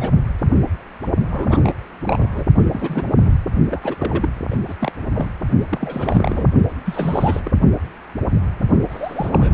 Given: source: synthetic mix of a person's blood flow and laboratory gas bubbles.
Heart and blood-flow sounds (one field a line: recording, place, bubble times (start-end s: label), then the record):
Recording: Doppler ultrasound of blood flow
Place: precordium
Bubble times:
0.00-0.10 s: bubbles
1.30-1.73 s: bubbles
2.05-2.45 s: bubbles
2.58-2.66 s: bubbles
2.72-3.03 s: bubbles
3.25-3.37 s: bubbles
3.70-3.95 s: bubbles
3.98-4.29 s: bubbles
4.50-4.57 s: bubbles
4.67-4.75 s: bubbles
4.79-4.92 s: bubbles
5.09-5.29 s: bubbles
5.69-6.46 s: bubbles
6.85-7.41 s: bubbles
7.45-7.51 s: bubbles
8.90-9.54 s: bubbles
From the record:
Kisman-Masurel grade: 332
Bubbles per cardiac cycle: rolling drumbeat, 9 or more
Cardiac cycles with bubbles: 50 to 99%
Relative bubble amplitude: moderate (0.250 to 0.450)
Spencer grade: 3 (all of the cardiac periods contain showers or single bubble signals, but not dominating or overriding the cardiac motion signals)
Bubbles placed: only in the low amplitude regions of the cardiac cycle